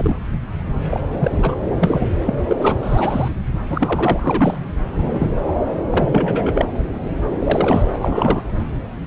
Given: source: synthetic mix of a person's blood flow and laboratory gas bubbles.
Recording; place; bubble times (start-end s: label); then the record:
Doppler ultrasound of blood flow; subclavian vein
0.00-0.14 s: bubbles
0.90-1.00 s: bubbles
1.10-1.55 s: bubbles
1.69-2.08 s: bubbles
2.26-2.38 s: bubbles
2.48-2.79 s: bubbles
2.82-3.28 s: bubbles
3.67-4.59 s: bubbles
4.97-5.31 s: bubbles
5.90-6.66 s: bubbles
7.39-7.83 s: bubbles
7.93-7.98 s: bubbles
8.01-8.41 s: bubbles
From the record:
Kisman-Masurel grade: 233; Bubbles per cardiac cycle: several, 3 to 8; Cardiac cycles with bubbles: 50 to 99%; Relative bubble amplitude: loud (0.450 to 0.775); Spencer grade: 3 (all of the cardiac periods contain showers or single bubble signals, but not dominating or overriding the cardiac motion signals); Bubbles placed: anywhere in the cardiac cycle